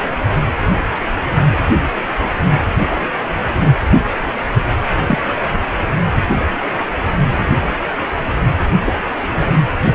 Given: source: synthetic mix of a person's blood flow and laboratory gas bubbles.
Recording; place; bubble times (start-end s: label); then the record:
Doppler ultrasound of blood flow; precordium
2.89-3.01 s: bubbles
3.53-3.75 s: bubbles
5.08-5.19 s: bubbles
8.85-8.94 s: bubbles
9.36-9.60 s: bubbles
9.83-9.95 s: bubbles
From the record:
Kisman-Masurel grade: 122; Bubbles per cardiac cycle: 1 to 2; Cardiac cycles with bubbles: 10 to 50%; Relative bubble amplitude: moderate (0.250 to 0.450); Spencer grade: 2 (many but less than half of the cardiac periods contain bubble signals, singularly or in groups); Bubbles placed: anywhere in the cardiac cycle